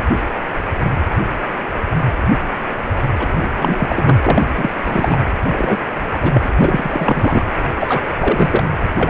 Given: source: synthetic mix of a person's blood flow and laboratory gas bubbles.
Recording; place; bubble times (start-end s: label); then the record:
Doppler ultrasound of blood flow; precordium
3.19-3.27 s: bubbles
3.37-3.48 s: bubbles
3.57-4.47 s: bubbles
4.55-4.71 s: bubbles
4.85-5.17 s: bubbles
5.47-5.78 s: bubbles
6.13-6.18 s: bubbles
6.21-6.32 s: bubbles
6.34-6.50 s: bubbles
6.60-7.50 s: bubbles
7.79-8.02 s: bubbles
8.21-8.69 s: bubbles
8.97-9.10 s: bubbles
From the record:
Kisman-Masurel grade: 333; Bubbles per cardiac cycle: rolling drumbeat, 9 or more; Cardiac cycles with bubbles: 50 to 99%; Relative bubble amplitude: loud (0.450 to 0.775); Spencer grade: 3 (all of the cardiac periods contain showers or single bubble signals, but not dominating or overriding the cardiac motion signals); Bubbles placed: anywhere in the cardiac cycle